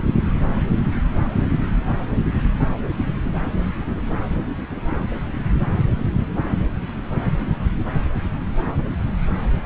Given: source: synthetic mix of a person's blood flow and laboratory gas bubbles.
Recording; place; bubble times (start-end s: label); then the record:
Doppler ultrasound of blood flow; subclavian vein
no bubbles
From the record:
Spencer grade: 0 (complete lack of bubble signals)